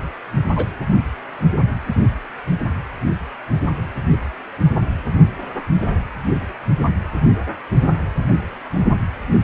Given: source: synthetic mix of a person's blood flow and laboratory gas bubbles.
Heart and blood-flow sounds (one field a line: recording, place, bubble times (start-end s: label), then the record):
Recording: Doppler ultrasound of blood flow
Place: precordium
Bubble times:
0.49-0.68 s: bubbles
From the record:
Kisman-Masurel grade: 122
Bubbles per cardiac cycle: 1 to 2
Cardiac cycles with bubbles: 10 to 50%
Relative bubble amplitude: moderate (0.250 to 0.450)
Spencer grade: 2 (many but less than half of the cardiac periods contain bubble signals, singularly or in groups)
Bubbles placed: anywhere in the cardiac cycle